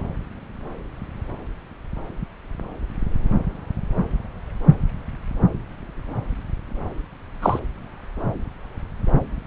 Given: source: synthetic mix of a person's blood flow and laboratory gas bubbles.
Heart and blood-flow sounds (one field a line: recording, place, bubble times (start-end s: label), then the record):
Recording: Doppler ultrasound of blood flow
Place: subclavian vein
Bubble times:
7.42-7.59 s: bubbles
From the record:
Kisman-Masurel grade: 113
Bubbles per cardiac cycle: 1 to 2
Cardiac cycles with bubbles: 1 to 10%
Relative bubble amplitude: loud (0.450 to 0.775)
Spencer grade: 1 (occasional bubble signal discernible with the cardiac motion signal, with majority of cardiac periods free of bubbles)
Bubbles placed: anywhere in the cardiac cycle